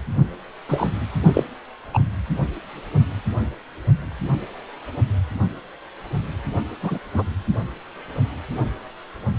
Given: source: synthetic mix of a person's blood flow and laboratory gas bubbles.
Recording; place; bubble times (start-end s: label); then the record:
Doppler ultrasound of blood flow; precordium
0.69-0.90 s: bubbles
1.33-1.44 s: bubbles
1.93-1.99 s: bubbles
6.82-6.98 s: bubbles
7.14-7.23 s: bubbles
From the record:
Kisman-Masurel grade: 123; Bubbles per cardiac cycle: 1 to 2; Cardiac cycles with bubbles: 10 to 50%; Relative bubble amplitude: loud (0.450 to 0.775); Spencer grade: 2 (many but less than half of the cardiac periods contain bubble signals, singularly or in groups); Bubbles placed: only in the low amplitude regions of the cardiac cycle